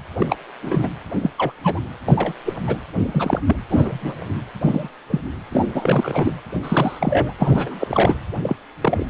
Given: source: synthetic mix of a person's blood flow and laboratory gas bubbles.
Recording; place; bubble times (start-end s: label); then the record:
Doppler ultrasound of blood flow; precordium
0.18-0.27 s: bubbles
0.30-0.36 s: bubbles
0.62-0.90 s: bubbles
1.23-1.30 s: bubbles
1.38-1.52 s: bubbles
1.64-1.80 s: bubbles
2.08-2.33 s: bubbles
2.45-2.54 s: bubbles
2.67-2.78 s: bubbles
2.93-3.41 s: bubbles
3.46-3.56 s: bubbles
3.70-4.15 s: bubbles
4.61-4.89 s: bubbles
5.10-5.21 s: bubbles
5.52-5.66 s: bubbles
5.74-6.33 s: bubbles
6.62-7.33 s: bubbles
7.39-8.16 s: bubbles
8.42-8.56 s: bubbles
8.81-9.06 s: bubbles
From the record:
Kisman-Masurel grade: 242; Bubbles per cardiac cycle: several, 3 to 8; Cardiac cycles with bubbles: 100%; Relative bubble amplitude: moderate (0.250 to 0.450); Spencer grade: 3 (all of the cardiac periods contain showers or single bubble signals, but not dominating or overriding the cardiac motion signals); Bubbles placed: anywhere in the cardiac cycle